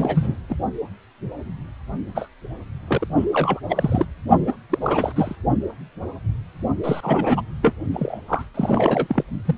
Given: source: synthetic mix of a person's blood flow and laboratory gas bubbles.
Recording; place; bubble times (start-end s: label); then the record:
Doppler ultrasound of blood flow; precordium
0.00-0.40 s: bubbles
0.49-0.55 s: bubbles
2.15-2.28 s: bubbles
2.88-3.07 s: bubbles
3.17-3.25 s: bubbles
3.33-3.60 s: bubbles
3.69-4.05 s: bubbles
4.47-4.53 s: bubbles
4.70-5.36 s: bubbles
6.83-7.42 s: bubbles
7.63-7.75 s: bubbles
7.93-8.19 s: bubbles
8.28-8.42 s: bubbles
8.54-9.23 s: bubbles
9.45-9.55 s: bubbles
From the record:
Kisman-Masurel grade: 332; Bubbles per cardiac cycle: rolling drumbeat, 9 or more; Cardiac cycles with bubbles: 50 to 99%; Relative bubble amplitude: moderate (0.250 to 0.450); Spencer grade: 3 (all of the cardiac periods contain showers or single bubble signals, but not dominating or overriding the cardiac motion signals); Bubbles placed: only in the low amplitude regions of the cardiac cycle